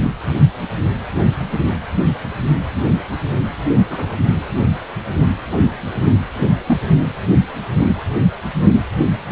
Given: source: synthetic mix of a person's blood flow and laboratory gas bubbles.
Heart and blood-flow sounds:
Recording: Doppler ultrasound of blood flow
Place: precordium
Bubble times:
0.02-0.11 s: bubbles
3.90-4.16 s: bubbles
6.66-6.80 s: bubbles
From the record:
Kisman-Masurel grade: 122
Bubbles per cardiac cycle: 1 to 2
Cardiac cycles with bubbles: 10 to 50%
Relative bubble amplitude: moderate (0.250 to 0.450)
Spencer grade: 2 (many but less than half of the cardiac periods contain bubble signals, singularly or in groups)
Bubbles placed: anywhere in the cardiac cycle

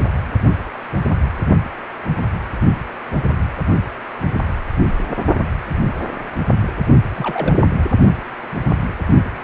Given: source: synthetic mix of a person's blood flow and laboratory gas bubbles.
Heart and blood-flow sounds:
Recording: Doppler ultrasound of blood flow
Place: precordium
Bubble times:
7.15-7.57 s: bubbles
From the record:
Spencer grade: 2 (many but less than half of the cardiac periods contain bubble signals, singularly or in groups)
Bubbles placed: only in the low amplitude regions of the cardiac cycle

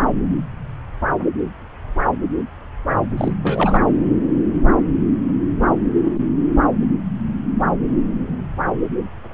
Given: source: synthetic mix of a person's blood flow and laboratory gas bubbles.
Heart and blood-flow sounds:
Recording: Doppler ultrasound of blood flow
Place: subclavian vein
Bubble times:
3.17-3.33 s: bubbles
3.43-3.79 s: bubbles
From the record:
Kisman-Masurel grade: 212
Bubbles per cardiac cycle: several, 3 to 8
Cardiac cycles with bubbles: 1 to 10%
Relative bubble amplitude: moderate (0.250 to 0.450)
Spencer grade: 1 (occasional bubble signal discernible with the cardiac motion signal, with majority of cardiac periods free of bubbles)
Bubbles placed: anywhere in the cardiac cycle

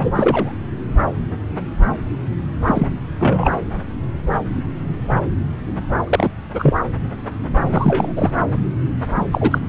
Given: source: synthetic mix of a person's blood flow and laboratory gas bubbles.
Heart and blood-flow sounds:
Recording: Doppler ultrasound of blood flow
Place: subclavian vein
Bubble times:
0.00-0.11 s: bubbles
0.15-0.53 s: bubbles
2.67-2.88 s: bubbles
3.19-3.51 s: bubbles
6.07-6.29 s: bubbles
6.54-6.76 s: bubbles
7.68-8.12 s: bubbles
8.16-8.31 s: bubbles
9.32-9.59 s: bubbles
From the record:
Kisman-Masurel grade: 223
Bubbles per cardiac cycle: several, 3 to 8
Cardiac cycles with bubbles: 10 to 50%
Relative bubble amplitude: loud (0.450 to 0.775)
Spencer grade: 2 (many but less than half of the cardiac periods contain bubble signals, singularly or in groups)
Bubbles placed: anywhere in the cardiac cycle

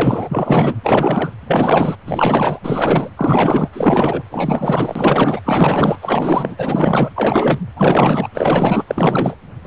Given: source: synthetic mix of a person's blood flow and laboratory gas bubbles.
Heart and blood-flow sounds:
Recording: Doppler ultrasound of blood flow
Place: precordium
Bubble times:
0.00-0.75 s: bubbles
0.83-1.31 s: bubbles
1.47-1.96 s: bubbles
2.06-2.59 s: bubbles
2.63-3.10 s: bubbles
3.17-3.69 s: bubbles
3.73-4.23 s: bubbles
4.31-5.40 s: bubbles
5.45-5.98 s: bubbles
6.02-6.55 s: bubbles
6.58-7.10 s: bubbles
7.16-7.60 s: bubbles
7.76-8.28 s: bubbles
8.34-8.85 s: bubbles
8.87-9.35 s: bubbles
9.64-9.67 s: bubbles
From the record:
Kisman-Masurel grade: 444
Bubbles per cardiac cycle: continuous sound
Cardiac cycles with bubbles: 100%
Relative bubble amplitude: maximal (0.775 to 0.999)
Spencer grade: 4 (maximum detectable bubble signal sounding continuously throughout systole and diastole of every cardiac period, and overriding the amplitude of the normal cardiac signals)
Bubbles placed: anywhere in the cardiac cycle

